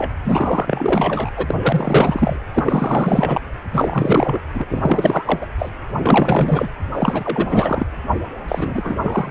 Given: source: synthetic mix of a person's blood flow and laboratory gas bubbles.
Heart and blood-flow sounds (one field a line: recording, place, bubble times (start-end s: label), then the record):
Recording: Doppler ultrasound of blood flow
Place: precordium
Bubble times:
0.00-0.10 s: bubbles
0.23-1.31 s: bubbles
1.37-1.54 s: bubbles
1.62-2.37 s: bubbles
2.53-3.41 s: bubbles
3.73-4.42 s: bubbles
4.54-4.65 s: bubbles
4.70-5.46 s: bubbles
5.58-5.71 s: bubbles
6.03-6.69 s: bubbles
6.93-7.86 s: bubbles
8.48-9.31 s: bubbles
From the record:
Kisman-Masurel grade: 444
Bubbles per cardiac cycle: continuous sound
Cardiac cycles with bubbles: 100%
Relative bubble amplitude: maximal (0.775 to 0.999)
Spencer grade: 4 (maximum detectable bubble signal sounding continuously throughout systole and diastole of every cardiac period, and overriding the amplitude of the normal cardiac signals)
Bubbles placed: anywhere in the cardiac cycle